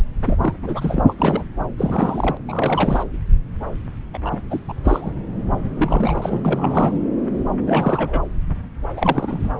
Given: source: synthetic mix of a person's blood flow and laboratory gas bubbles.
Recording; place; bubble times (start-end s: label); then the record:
Doppler ultrasound of blood flow; subclavian vein
0.26-0.54 s: bubbles
0.62-1.03 s: bubbles
1.07-1.44 s: bubbles
1.77-2.37 s: bubbles
2.48-3.04 s: bubbles
4.13-4.18 s: bubbles
4.24-4.42 s: bubbles
4.50-4.59 s: bubbles
4.68-4.72 s: bubbles
4.84-5.12 s: bubbles
5.76-6.41 s: bubbles
6.45-6.99 s: bubbles
7.67-8.22 s: bubbles
8.96-9.54 s: bubbles
From the record:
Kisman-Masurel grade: 332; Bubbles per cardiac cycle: rolling drumbeat, 9 or more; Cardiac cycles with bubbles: 50 to 99%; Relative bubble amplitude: moderate (0.250 to 0.450); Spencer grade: 3 (all of the cardiac periods contain showers or single bubble signals, but not dominating or overriding the cardiac motion signals); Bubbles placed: anywhere in the cardiac cycle